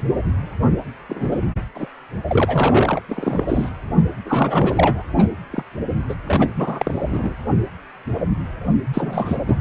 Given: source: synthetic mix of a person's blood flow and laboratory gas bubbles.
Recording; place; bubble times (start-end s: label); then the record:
Doppler ultrasound of blood flow; precordium
0.00-0.02 s: bubbles
1.09-1.39 s: bubbles
1.75-1.87 s: bubbles
2.28-3.02 s: bubbles
3.08-3.69 s: bubbles
4.25-5.04 s: bubbles
5.17-5.25 s: bubbles
5.50-5.63 s: bubbles
6.08-6.14 s: bubbles
6.26-7.35 s: bubbles
8.94-9.42 s: bubbles
9.47-9.56 s: bubbles
From the record:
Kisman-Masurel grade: 232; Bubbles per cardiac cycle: several, 3 to 8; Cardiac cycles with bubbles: 50 to 99%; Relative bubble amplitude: moderate (0.250 to 0.450); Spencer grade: 3 (all of the cardiac periods contain showers or single bubble signals, but not dominating or overriding the cardiac motion signals); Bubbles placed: anywhere in the cardiac cycle